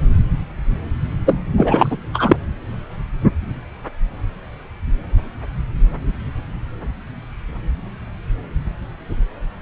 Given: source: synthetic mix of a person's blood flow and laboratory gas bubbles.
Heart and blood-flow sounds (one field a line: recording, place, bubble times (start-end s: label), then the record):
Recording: Doppler ultrasound of blood flow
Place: subclavian vein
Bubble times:
1.26-1.40 s: bubbles
1.56-1.97 s: bubbles
2.13-2.36 s: bubbles
From the record:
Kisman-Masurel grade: 223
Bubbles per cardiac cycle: several, 3 to 8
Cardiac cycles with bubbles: 10 to 50%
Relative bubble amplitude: loud (0.450 to 0.775)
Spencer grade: 2 (many but less than half of the cardiac periods contain bubble signals, singularly or in groups)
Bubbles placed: anywhere in the cardiac cycle